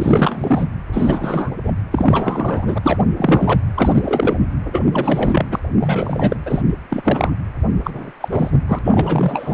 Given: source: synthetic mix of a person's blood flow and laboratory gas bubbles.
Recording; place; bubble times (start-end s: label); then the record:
Doppler ultrasound of blood flow; precordium
0.00-0.66 s: bubbles
0.92-1.50 s: bubbles
1.63-1.74 s: bubbles
1.92-2.78 s: bubbles
2.83-2.98 s: bubbles
3.17-3.60 s: bubbles
3.74-4.38 s: bubbles
4.72-4.84 s: bubbles
4.92-5.46 s: bubbles
5.51-5.59 s: bubbles
5.79-6.37 s: bubbles
6.46-6.62 s: bubbles
6.90-7.30 s: bubbles
7.83-8.12 s: bubbles
8.21-8.29 s: bubbles
8.31-8.58 s: bubbles
8.68-8.79 s: bubbles
8.85-9.54 s: bubbles
From the record:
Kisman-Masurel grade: 343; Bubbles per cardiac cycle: rolling drumbeat, 9 or more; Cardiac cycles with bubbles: 100%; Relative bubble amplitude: loud (0.450 to 0.775); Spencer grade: 3 (all of the cardiac periods contain showers or single bubble signals, but not dominating or overriding the cardiac motion signals); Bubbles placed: anywhere in the cardiac cycle